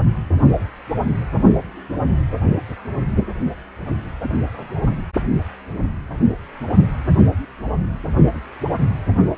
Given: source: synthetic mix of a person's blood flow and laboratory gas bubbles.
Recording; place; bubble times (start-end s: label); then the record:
Doppler ultrasound of blood flow; precordium
4.22-4.37 s: bubbles
4.58-4.95 s: bubbles
From the record:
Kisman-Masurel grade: 111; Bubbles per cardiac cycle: 1 to 2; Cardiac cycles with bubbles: 1 to 10%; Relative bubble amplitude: barely perceptible (0.100 to 0.250); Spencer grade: 1 (occasional bubble signal discernible with the cardiac motion signal, with majority of cardiac periods free of bubbles); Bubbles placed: only in the low amplitude regions of the cardiac cycle